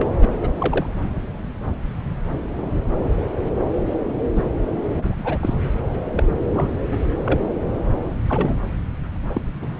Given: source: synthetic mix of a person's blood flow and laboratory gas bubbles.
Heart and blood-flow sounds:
Doppler ultrasound of blood flow; subclavian vein
0.00-0.07 s: bubbles
0.22-0.28 s: bubbles
0.42-0.49 s: bubbles
0.58-0.86 s: bubbles
4.35-4.44 s: bubbles
4.99-5.38 s: bubbles
5.41-5.54 s: bubbles
6.15-6.24 s: bubbles
6.53-6.68 s: bubbles
6.91-6.98 s: bubbles
7.25-7.40 s: bubbles
8.29-8.56 s: bubbles
9.29-9.41 s: bubbles
9.61-9.67 s: bubbles
From the record:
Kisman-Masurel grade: 232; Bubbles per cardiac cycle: several, 3 to 8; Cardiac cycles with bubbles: 50 to 99%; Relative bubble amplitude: moderate (0.250 to 0.450); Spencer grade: 3 (all of the cardiac periods contain showers or single bubble signals, but not dominating or overriding the cardiac motion signals); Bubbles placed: anywhere in the cardiac cycle

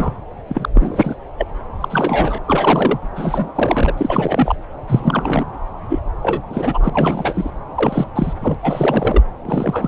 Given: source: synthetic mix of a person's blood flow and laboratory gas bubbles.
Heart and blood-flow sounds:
Doppler ultrasound of blood flow; subclavian vein
0.00-0.11 s: bubbles
0.48-0.69 s: bubbles
0.74-1.19 s: bubbles
1.38-1.46 s: bubbles
1.81-2.38 s: bubbles
2.47-3.00 s: bubbles
3.15-3.52 s: bubbles
3.55-3.94 s: bubbles
3.97-4.55 s: bubbles
4.87-5.46 s: bubbles
5.89-5.99 s: bubbles
6.21-6.43 s: bubbles
6.50-6.90 s: bubbles
6.93-7.50 s: bubbles
7.75-8.06 s: bubbles
8.15-8.33 s: bubbles
8.41-8.54 s: bubbles
8.62-9.22 s: bubbles
9.45-9.88 s: bubbles
From the record:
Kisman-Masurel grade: 333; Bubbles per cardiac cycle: rolling drumbeat, 9 or more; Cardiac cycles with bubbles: 50 to 99%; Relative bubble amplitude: loud (0.450 to 0.775); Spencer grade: 3 (all of the cardiac periods contain showers or single bubble signals, but not dominating or overriding the cardiac motion signals); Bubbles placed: anywhere in the cardiac cycle

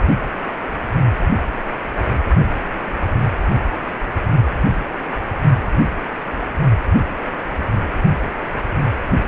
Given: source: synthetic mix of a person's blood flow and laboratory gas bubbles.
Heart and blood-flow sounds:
Doppler ultrasound of blood flow; precordium
2.96-3.00 s: bubbles
From the record:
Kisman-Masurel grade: 111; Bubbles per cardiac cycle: 1 to 2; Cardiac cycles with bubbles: 1 to 10%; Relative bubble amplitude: barely perceptible (0.100 to 0.250); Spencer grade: 1 (occasional bubble signal discernible with the cardiac motion signal, with majority of cardiac periods free of bubbles); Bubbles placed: only in the low amplitude regions of the cardiac cycle

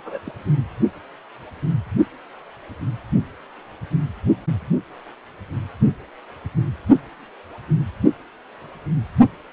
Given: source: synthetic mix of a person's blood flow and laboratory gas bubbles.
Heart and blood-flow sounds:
Doppler ultrasound of blood flow; precordium
0.00-0.20 s: bubbles
0.25-0.32 s: bubbles
From the record:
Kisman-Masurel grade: 211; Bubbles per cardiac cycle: several, 3 to 8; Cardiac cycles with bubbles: 1 to 10%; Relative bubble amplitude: barely perceptible (0.100 to 0.250); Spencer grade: 1 (occasional bubble signal discernible with the cardiac motion signal, with majority of cardiac periods free of bubbles); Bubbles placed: only in the low amplitude regions of the cardiac cycle

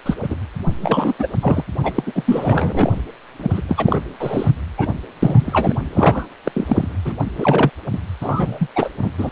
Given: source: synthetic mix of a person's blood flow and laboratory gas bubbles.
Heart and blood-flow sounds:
Doppler ultrasound of blood flow; precordium
0.05-0.15 s: bubbles
0.23-0.28 s: bubbles
0.30-0.36 s: bubbles
0.80-1.14 s: bubbles
1.19-1.28 s: bubbles
1.42-1.63 s: bubbles
1.83-2.03 s: bubbles
2.06-2.12 s: bubbles
2.15-2.22 s: bubbles
2.26-2.92 s: bubbles
3.38-3.61 s: bubbles
3.68-4.01 s: bubbles
4.20-4.50 s: bubbles
4.78-4.94 s: bubbles
5.22-5.75 s: bubbles
5.94-6.27 s: bubbles
6.44-6.97 s: bubbles
7.04-7.13 s: bubbles
7.20-7.24 s: bubbles
7.38-7.71 s: bubbles
7.92-7.98 s: bubbles
8.21-8.67 s: bubbles
8.76-8.89 s: bubbles
9.02-9.11 s: bubbles
9.18-9.29 s: bubbles
From the record:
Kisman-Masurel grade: 343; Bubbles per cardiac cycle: rolling drumbeat, 9 or more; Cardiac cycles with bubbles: 100%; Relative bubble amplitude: loud (0.450 to 0.775); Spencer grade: 3 (all of the cardiac periods contain showers or single bubble signals, but not dominating or overriding the cardiac motion signals); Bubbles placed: anywhere in the cardiac cycle

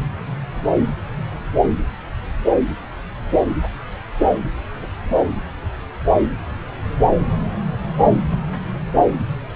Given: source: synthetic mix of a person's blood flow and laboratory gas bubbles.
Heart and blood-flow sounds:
Doppler ultrasound of blood flow; subclavian vein
no bubbles
From the record:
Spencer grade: 0 (complete lack of bubble signals)

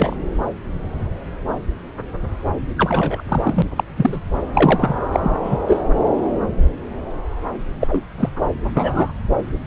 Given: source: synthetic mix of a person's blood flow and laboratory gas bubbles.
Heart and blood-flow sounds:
Doppler ultrasound of blood flow; subclavian vein
0.00-0.16 s: bubbles
2.77-3.23 s: bubbles
3.28-3.62 s: bubbles
3.76-3.83 s: bubbles
3.96-4.21 s: bubbles
4.54-4.96 s: bubbles
5.12-5.31 s: bubbles
5.42-5.58 s: bubbles
5.67-5.83 s: bubbles
7.80-8.04 s: bubbles
8.17-8.29 s: bubbles
8.77-9.10 s: bubbles
From the record:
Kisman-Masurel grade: 233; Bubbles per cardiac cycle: several, 3 to 8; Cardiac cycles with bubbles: 50 to 99%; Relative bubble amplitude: loud (0.450 to 0.775); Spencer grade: 3 (all of the cardiac periods contain showers or single bubble signals, but not dominating or overriding the cardiac motion signals); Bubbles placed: anywhere in the cardiac cycle

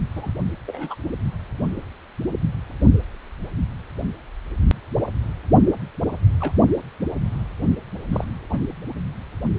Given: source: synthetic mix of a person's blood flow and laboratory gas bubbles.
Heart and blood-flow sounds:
Doppler ultrasound of blood flow; precordium
0.15-0.30 s: bubbles
0.67-0.95 s: bubbles
6.40-6.52 s: bubbles
8.12-8.24 s: bubbles
8.49-8.60 s: bubbles
From the record:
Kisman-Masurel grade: 122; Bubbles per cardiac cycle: 1 to 2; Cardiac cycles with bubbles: 10 to 50%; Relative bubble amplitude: moderate (0.250 to 0.450); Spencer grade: 2 (many but less than half of the cardiac periods contain bubble signals, singularly or in groups); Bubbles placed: only in the low amplitude regions of the cardiac cycle

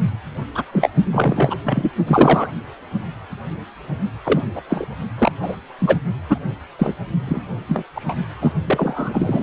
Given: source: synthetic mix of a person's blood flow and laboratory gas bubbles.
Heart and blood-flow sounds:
Doppler ultrasound of blood flow; precordium
0.54-0.62 s: bubbles
0.72-0.89 s: bubbles
1.11-1.55 s: bubbles
1.65-1.91 s: bubbles
2.07-2.48 s: bubbles
4.24-4.43 s: bubbles
4.56-4.61 s: bubbles
4.70-4.86 s: bubbles
5.17-5.32 s: bubbles
5.42-5.56 s: bubbles
5.79-5.98 s: bubbles
6.29-6.38 s: bubbles
6.79-6.95 s: bubbles
7.27-7.42 s: bubbles
7.68-7.84 s: bubbles
7.95-8.14 s: bubbles
8.40-8.53 s: bubbles
8.65-9.43 s: bubbles
From the record:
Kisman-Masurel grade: 233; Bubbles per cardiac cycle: several, 3 to 8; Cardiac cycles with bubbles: 50 to 99%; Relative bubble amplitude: loud (0.450 to 0.775); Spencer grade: 3 (all of the cardiac periods contain showers or single bubble signals, but not dominating or overriding the cardiac motion signals); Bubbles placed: only in the low amplitude regions of the cardiac cycle

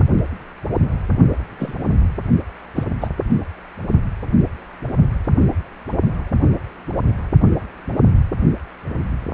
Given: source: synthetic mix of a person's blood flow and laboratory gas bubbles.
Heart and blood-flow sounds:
Doppler ultrasound of blood flow; precordium
1.58-1.74 s: bubbles
2.75-2.83 s: bubbles
3.00-3.08 s: bubbles
From the record:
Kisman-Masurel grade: 122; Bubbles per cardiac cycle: 1 to 2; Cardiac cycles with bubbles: 10 to 50%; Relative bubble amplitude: moderate (0.250 to 0.450); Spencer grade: 2 (many but less than half of the cardiac periods contain bubble signals, singularly or in groups); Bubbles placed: only in the low amplitude regions of the cardiac cycle

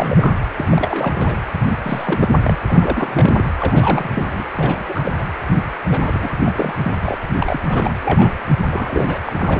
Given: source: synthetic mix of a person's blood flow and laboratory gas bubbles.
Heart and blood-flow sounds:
Doppler ultrasound of blood flow; precordium
0.00-0.36 s: bubbles
0.56-0.69 s: bubbles
0.71-1.35 s: bubbles
1.60-1.75 s: bubbles
1.83-2.36 s: bubbles
2.42-2.58 s: bubbles
2.69-3.43 s: bubbles
3.59-4.10 s: bubbles
4.12-4.46 s: bubbles
4.57-4.84 s: bubbles
4.88-5.12 s: bubbles
5.17-5.24 s: bubbles
5.91-6.29 s: bubbles
6.45-6.51 s: bubbles
6.55-6.75 s: bubbles
6.83-6.92 s: bubbles
7.02-7.17 s: bubbles
7.34-7.37 s: bubbles
7.39-7.60 s: bubbles
7.67-7.94 s: bubbles
8.02-8.35 s: bubbles
8.72-9.20 s: bubbles
9.25-9.33 s: bubbles
9.37-9.59 s: bubbles
From the record:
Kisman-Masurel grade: 342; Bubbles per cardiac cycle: rolling drumbeat, 9 or more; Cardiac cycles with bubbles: 100%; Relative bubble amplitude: moderate (0.250 to 0.450); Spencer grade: 3 (all of the cardiac periods contain showers or single bubble signals, but not dominating or overriding the cardiac motion signals); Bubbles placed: anywhere in the cardiac cycle

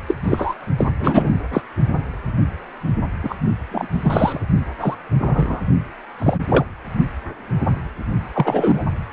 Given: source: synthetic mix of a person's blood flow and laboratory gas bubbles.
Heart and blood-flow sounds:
Doppler ultrasound of blood flow; precordium
0.07-0.14 s: bubbles
0.24-0.54 s: bubbles
0.78-0.91 s: bubbles
0.99-1.31 s: bubbles
1.53-1.61 s: bubbles
3.22-3.35 s: bubbles
3.71-3.87 s: bubbles
3.92-4.42 s: bubbles
4.80-4.96 s: bubbles
5.18-5.60 s: bubbles
6.18-6.38 s: bubbles
6.50-6.65 s: bubbles
8.33-8.83 s: bubbles
From the record:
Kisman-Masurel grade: 233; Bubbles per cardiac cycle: several, 3 to 8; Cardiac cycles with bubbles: 50 to 99%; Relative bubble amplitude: loud (0.450 to 0.775); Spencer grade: 3 (all of the cardiac periods contain showers or single bubble signals, but not dominating or overriding the cardiac motion signals); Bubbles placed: only in the low amplitude regions of the cardiac cycle

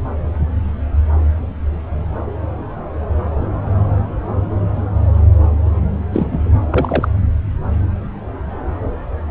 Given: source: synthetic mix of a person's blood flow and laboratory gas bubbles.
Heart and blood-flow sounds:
Doppler ultrasound of blood flow; subclavian vein
6.10-6.40 s: bubbles
6.70-7.08 s: bubbles
From the record:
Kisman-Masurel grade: 222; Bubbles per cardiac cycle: several, 3 to 8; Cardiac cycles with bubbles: 10 to 50%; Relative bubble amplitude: moderate (0.250 to 0.450); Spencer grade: 2 (many but less than half of the cardiac periods contain bubble signals, singularly or in groups); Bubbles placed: anywhere in the cardiac cycle

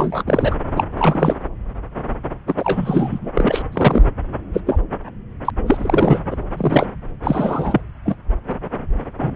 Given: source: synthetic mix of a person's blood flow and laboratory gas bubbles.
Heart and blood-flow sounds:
Doppler ultrasound of blood flow; subclavian vein
0.00-0.22 s: bubbles
0.28-0.56 s: bubbles
0.76-0.84 s: bubbles
0.97-1.36 s: bubbles
2.47-3.31 s: bubbles
3.35-3.62 s: bubbles
3.72-4.05 s: bubbles
4.53-4.61 s: bubbles
4.65-4.79 s: bubbles
5.44-5.50 s: bubbles
5.66-6.18 s: bubbles
6.30-6.36 s: bubbles
6.57-6.86 s: bubbles
7.23-7.82 s: bubbles
8.05-8.16 s: bubbles
8.50-8.55 s: bubbles
9.17-9.36 s: bubbles
From the record:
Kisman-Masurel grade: 233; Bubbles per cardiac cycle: several, 3 to 8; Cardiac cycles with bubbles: 50 to 99%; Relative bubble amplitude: loud (0.450 to 0.775); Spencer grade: 3 (all of the cardiac periods contain showers or single bubble signals, but not dominating or overriding the cardiac motion signals); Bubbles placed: anywhere in the cardiac cycle

